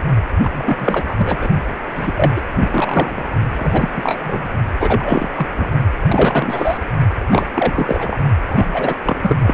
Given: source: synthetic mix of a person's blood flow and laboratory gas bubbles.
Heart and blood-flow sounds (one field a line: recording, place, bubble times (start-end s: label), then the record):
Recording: Doppler ultrasound of blood flow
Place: precordium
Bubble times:
0.43-0.50 s: bubbles
0.53-1.15 s: bubbles
1.18-1.49 s: bubbles
1.95-2.12 s: bubbles
2.16-2.33 s: bubbles
2.36-2.41 s: bubbles
2.58-3.23 s: bubbles
3.57-3.90 s: bubbles
3.94-4.49 s: bubbles
4.79-5.28 s: bubbles
5.36-5.46 s: bubbles
5.56-5.71 s: bubbles
6.07-6.78 s: bubbles
7.30-7.49 s: bubbles
7.54-8.18 s: bubbles
8.49-8.95 s: bubbles
9.03-9.36 s: bubbles
9.42-9.54 s: bubbles
From the record:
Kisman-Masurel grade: 343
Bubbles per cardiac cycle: rolling drumbeat, 9 or more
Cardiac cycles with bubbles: 100%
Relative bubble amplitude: loud (0.450 to 0.775)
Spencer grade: 3 (all of the cardiac periods contain showers or single bubble signals, but not dominating or overriding the cardiac motion signals)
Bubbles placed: only in the low amplitude regions of the cardiac cycle